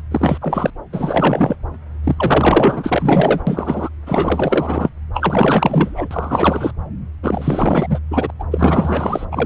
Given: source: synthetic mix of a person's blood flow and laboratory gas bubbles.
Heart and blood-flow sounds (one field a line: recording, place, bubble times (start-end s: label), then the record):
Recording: Doppler ultrasound of blood flow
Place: subclavian vein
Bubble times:
0.11-0.38 s: bubbles
0.41-0.70 s: bubbles
0.92-1.56 s: bubbles
2.03-3.40 s: bubbles
3.46-3.89 s: bubbles
4.06-4.90 s: bubbles
5.14-6.08 s: bubbles
6.11-6.72 s: bubbles
7.23-7.99 s: bubbles
8.11-8.30 s: bubbles
8.39-8.44 s: bubbles
8.51-9.25 s: bubbles
9.31-9.46 s: bubbles
From the record:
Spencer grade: 4 (maximum detectable bubble signal sounding continuously throughout systole and diastole of every cardiac period, and overriding the amplitude of the normal cardiac signals)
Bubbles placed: anywhere in the cardiac cycle